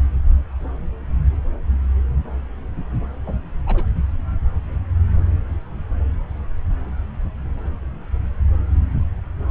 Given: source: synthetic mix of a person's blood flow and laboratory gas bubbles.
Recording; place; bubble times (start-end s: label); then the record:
Doppler ultrasound of blood flow; subclavian vein
3.26-3.34 s: bubbles
3.66-3.83 s: bubbles
From the record:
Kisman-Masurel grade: 111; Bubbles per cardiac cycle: 1 to 2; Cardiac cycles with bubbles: 1 to 10%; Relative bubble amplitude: barely perceptible (0.100 to 0.250); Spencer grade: 1 (occasional bubble signal discernible with the cardiac motion signal, with majority of cardiac periods free of bubbles); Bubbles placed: anywhere in the cardiac cycle